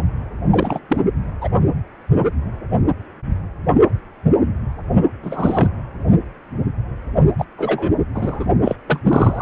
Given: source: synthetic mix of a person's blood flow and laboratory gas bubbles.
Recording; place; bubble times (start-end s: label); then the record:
Doppler ultrasound of blood flow; precordium
0.00-0.02 s: bubbles
0.51-0.79 s: bubbles
0.89-0.98 s: bubbles
1.41-1.48 s: bubbles
5.22-5.68 s: bubbles
7.38-7.45 s: bubbles
7.57-7.92 s: bubbles
8.14-8.46 s: bubbles
8.64-8.76 s: bubbles
8.87-9.00 s: bubbles
9.03-9.42 s: bubbles
From the record:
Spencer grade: 3 (all of the cardiac periods contain showers or single bubble signals, but not dominating or overriding the cardiac motion signals); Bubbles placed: only in the low amplitude regions of the cardiac cycle